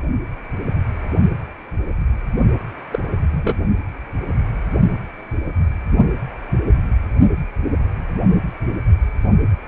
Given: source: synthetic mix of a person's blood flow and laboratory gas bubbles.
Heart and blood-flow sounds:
Doppler ultrasound of blood flow; precordium
2.91-2.99 s: bubbles
3.31-3.59 s: bubbles
From the record:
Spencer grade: 1 (occasional bubble signal discernible with the cardiac motion signal, with majority of cardiac periods free of bubbles); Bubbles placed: only in the low amplitude regions of the cardiac cycle

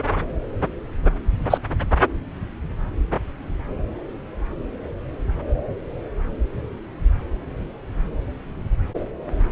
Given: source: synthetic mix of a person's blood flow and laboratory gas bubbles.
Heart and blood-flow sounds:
Doppler ultrasound of blood flow; subclavian vein
1.50-1.58 s: bubbles
From the record:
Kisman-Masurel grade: 113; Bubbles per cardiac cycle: 1 to 2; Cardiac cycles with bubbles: 1 to 10%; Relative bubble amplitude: loud (0.450 to 0.775); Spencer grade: 1 (occasional bubble signal discernible with the cardiac motion signal, with majority of cardiac periods free of bubbles); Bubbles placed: anywhere in the cardiac cycle

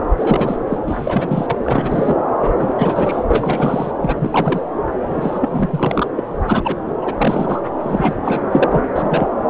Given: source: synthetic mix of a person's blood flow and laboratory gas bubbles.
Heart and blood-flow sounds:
Doppler ultrasound of blood flow; subclavian vein
0.17-0.59 s: bubbles
0.67-0.79 s: bubbles
0.86-1.46 s: bubbles
1.49-1.56 s: bubbles
1.59-2.16 s: bubbles
2.38-3.25 s: bubbles
3.30-3.92 s: bubbles
4.01-4.60 s: bubbles
5.08-6.07 s: bubbles
6.16-6.23 s: bubbles
6.47-6.77 s: bubbles
7.01-7.14 s: bubbles
7.17-7.62 s: bubbles
7.80-8.14 s: bubbles
8.24-8.44 s: bubbles
8.51-8.89 s: bubbles
8.95-9.27 s: bubbles
From the record:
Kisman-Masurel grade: 343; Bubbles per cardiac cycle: rolling drumbeat, 9 or more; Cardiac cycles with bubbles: 100%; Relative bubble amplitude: loud (0.450 to 0.775); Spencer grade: 3 (all of the cardiac periods contain showers or single bubble signals, but not dominating or overriding the cardiac motion signals); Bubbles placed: anywhere in the cardiac cycle

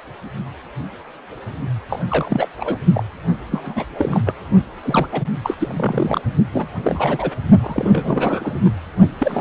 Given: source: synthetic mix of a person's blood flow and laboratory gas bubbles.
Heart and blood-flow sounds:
Doppler ultrasound of blood flow; precordium
1.90-2.06 s: bubbles
2.09-2.49 s: bubbles
2.58-2.77 s: bubbles
2.94-3.03 s: bubbles
3.51-3.84 s: bubbles
3.94-4.21 s: bubbles
4.25-4.34 s: bubbles
4.84-5.08 s: bubbles
5.11-5.22 s: bubbles
5.43-5.54 s: bubbles
5.58-6.21 s: bubbles
6.52-6.67 s: bubbles
6.83-7.30 s: bubbles
7.62-8.58 s: bubbles
8.65-8.70 s: bubbles
9.18-9.41 s: bubbles
From the record:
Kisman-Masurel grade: 332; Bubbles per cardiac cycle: rolling drumbeat, 9 or more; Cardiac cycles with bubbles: 50 to 99%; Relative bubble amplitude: moderate (0.250 to 0.450); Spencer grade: 3 (all of the cardiac periods contain showers or single bubble signals, but not dominating or overriding the cardiac motion signals); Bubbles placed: only in the low amplitude regions of the cardiac cycle

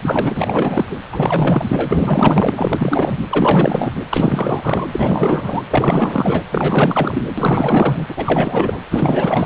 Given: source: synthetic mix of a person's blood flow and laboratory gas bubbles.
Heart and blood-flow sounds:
Doppler ultrasound of blood flow; precordium
0.00-0.85 s: bubbles
0.90-0.95 s: bubbles
1.11-2.54 s: bubbles
2.57-3.17 s: bubbles
3.29-3.92 s: bubbles
4.09-4.86 s: bubbles
4.92-5.62 s: bubbles
5.70-6.42 s: bubbles
6.52-7.23 s: bubbles
7.38-8.06 s: bubbles
8.09-8.78 s: bubbles
8.90-9.46 s: bubbles
From the record:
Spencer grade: 4 (maximum detectable bubble signal sounding continuously throughout systole and diastole of every cardiac period, and overriding the amplitude of the normal cardiac signals); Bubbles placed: anywhere in the cardiac cycle

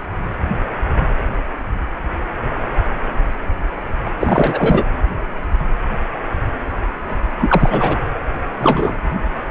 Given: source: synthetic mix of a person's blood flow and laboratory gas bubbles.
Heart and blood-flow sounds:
Doppler ultrasound of blood flow; precordium
4.20-4.83 s: bubbles
7.38-7.99 s: bubbles
8.58-8.96 s: bubbles
From the record:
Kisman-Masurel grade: 223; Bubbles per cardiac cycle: several, 3 to 8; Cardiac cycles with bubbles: 10 to 50%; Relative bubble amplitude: loud (0.450 to 0.775); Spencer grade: 2 (many but less than half of the cardiac periods contain bubble signals, singularly or in groups); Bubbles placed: anywhere in the cardiac cycle

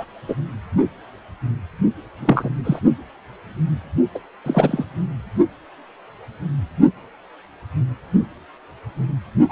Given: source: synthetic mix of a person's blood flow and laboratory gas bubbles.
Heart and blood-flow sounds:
Doppler ultrasound of blood flow; precordium
0.00-0.05 s: bubbles
0.28-0.35 s: bubbles
2.20-2.49 s: bubbles
2.65-2.79 s: bubbles
4.15-4.19 s: bubbles
4.44-4.85 s: bubbles
9.49-9.52 s: bubbles
From the record:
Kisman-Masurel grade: 222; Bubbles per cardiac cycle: several, 3 to 8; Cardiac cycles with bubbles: 10 to 50%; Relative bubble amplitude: moderate (0.250 to 0.450); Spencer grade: 2 (many but less than half of the cardiac periods contain bubble signals, singularly or in groups); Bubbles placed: only in the low amplitude regions of the cardiac cycle

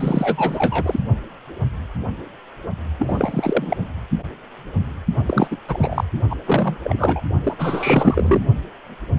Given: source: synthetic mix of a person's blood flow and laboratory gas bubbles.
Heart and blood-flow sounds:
Doppler ultrasound of blood flow; precordium
0.00-0.99 s: bubbles
2.99-3.76 s: bubbles
5.26-5.47 s: bubbles
5.50-5.57 s: bubbles
5.68-6.04 s: bubbles
6.29-6.36 s: bubbles
6.45-6.77 s: bubbles
6.83-7.24 s: bubbles
7.43-8.40 s: bubbles
From the record:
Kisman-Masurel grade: 333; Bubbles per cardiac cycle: rolling drumbeat, 9 or more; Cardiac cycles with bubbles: 50 to 99%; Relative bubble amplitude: loud (0.450 to 0.775); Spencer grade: 3 (all of the cardiac periods contain showers or single bubble signals, but not dominating or overriding the cardiac motion signals); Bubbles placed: only in the low amplitude regions of the cardiac cycle

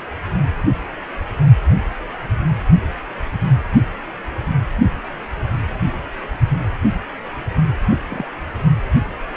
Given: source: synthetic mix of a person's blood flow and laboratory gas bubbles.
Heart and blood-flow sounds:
Doppler ultrasound of blood flow; precordium
8.08-8.24 s: bubbles
From the record:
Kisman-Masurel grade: 111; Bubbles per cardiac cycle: 1 to 2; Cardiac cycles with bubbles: 1 to 10%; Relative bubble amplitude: barely perceptible (0.100 to 0.250); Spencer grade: 1 (occasional bubble signal discernible with the cardiac motion signal, with majority of cardiac periods free of bubbles); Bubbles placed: only in the low amplitude regions of the cardiac cycle

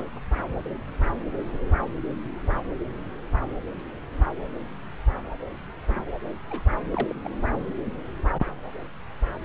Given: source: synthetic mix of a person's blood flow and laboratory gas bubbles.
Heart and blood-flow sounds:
Doppler ultrasound of blood flow; subclavian vein
6.48-6.62 s: bubbles
6.94-7.20 s: bubbles
7.24-7.29 s: bubbles
From the record:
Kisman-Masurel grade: 211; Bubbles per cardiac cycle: several, 3 to 8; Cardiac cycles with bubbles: 1 to 10%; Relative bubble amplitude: barely perceptible (0.100 to 0.250); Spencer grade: 1 (occasional bubble signal discernible with the cardiac motion signal, with majority of cardiac periods free of bubbles); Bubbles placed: anywhere in the cardiac cycle

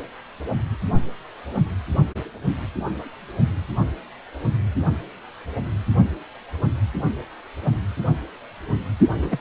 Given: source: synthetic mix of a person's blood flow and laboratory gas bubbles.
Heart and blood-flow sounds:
Doppler ultrasound of blood flow; precordium
9.16-9.41 s: bubbles
From the record:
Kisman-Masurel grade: 211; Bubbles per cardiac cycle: several, 3 to 8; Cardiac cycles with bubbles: 1 to 10%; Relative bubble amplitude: barely perceptible (0.100 to 0.250); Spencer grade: 1 (occasional bubble signal discernible with the cardiac motion signal, with majority of cardiac periods free of bubbles); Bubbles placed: only in the low amplitude regions of the cardiac cycle

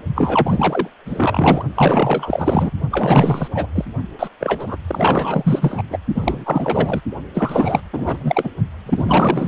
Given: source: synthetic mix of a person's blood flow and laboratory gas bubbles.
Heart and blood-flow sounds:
Doppler ultrasound of blood flow; precordium
0.15-0.88 s: bubbles
1.05-1.64 s: bubbles
1.74-2.71 s: bubbles
2.90-3.48 s: bubbles
3.53-3.67 s: bubbles
3.75-3.84 s: bubbles
4.19-4.28 s: bubbles
4.40-4.76 s: bubbles
4.87-5.83 s: bubbles
5.90-5.98 s: bubbles
6.13-7.01 s: bubbles
7.34-7.82 s: bubbles
7.93-8.49 s: bubbles
8.86-9.48 s: bubbles
From the record:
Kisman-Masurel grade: 444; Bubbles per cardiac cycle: continuous sound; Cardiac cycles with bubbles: 100%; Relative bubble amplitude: maximal (0.775 to 0.999); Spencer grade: 4 (maximum detectable bubble signal sounding continuously throughout systole and diastole of every cardiac period, and overriding the amplitude of the normal cardiac signals); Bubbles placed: only in the low amplitude regions of the cardiac cycle

